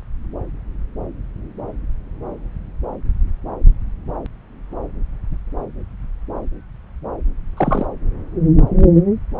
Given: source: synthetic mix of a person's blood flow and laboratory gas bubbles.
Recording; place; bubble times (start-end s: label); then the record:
Doppler ultrasound of blood flow; subclavian vein
7.57-7.85 s: bubbles
From the record:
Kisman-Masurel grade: 112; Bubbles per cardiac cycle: 1 to 2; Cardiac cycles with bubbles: 1 to 10%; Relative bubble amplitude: moderate (0.250 to 0.450); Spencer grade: 1 (occasional bubble signal discernible with the cardiac motion signal, with majority of cardiac periods free of bubbles); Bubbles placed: anywhere in the cardiac cycle